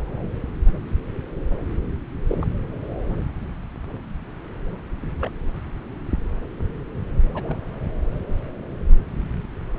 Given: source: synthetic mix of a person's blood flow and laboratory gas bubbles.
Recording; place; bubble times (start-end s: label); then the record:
Doppler ultrasound of blood flow; subclavian vein
2.27-2.47 s: bubbles
5.18-5.29 s: bubbles
5.32-5.36 s: bubbles
7.34-7.56 s: bubbles
From the record:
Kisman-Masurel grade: 121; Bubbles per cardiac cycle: 1 to 2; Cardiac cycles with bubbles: 10 to 50%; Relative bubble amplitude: barely perceptible (0.100 to 0.250); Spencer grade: 2 (many but less than half of the cardiac periods contain bubble signals, singularly or in groups); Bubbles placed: anywhere in the cardiac cycle